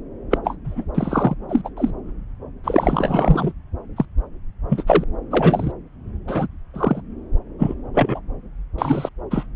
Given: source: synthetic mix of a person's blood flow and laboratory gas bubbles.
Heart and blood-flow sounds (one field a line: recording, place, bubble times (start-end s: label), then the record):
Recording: Doppler ultrasound of blood flow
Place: subclavian vein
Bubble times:
0.30-0.38 s: bubbles
0.44-0.56 s: bubbles
0.64-0.84 s: bubbles
0.95-1.35 s: bubbles
1.49-1.69 s: bubbles
1.77-1.91 s: bubbles
2.64-3.52 s: bubbles
3.96-4.05 s: bubbles
4.68-4.83 s: bubbles
4.86-5.04 s: bubbles
5.30-5.71 s: bubbles
6.27-6.47 s: bubbles
6.73-7.01 s: bubbles
7.58-7.75 s: bubbles
7.93-8.21 s: bubbles
8.78-9.09 s: bubbles
9.30-9.46 s: bubbles
From the record:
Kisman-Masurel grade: 243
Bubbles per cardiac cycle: several, 3 to 8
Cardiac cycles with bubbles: 100%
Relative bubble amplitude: loud (0.450 to 0.775)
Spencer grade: 3 (all of the cardiac periods contain showers or single bubble signals, but not dominating or overriding the cardiac motion signals)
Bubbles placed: anywhere in the cardiac cycle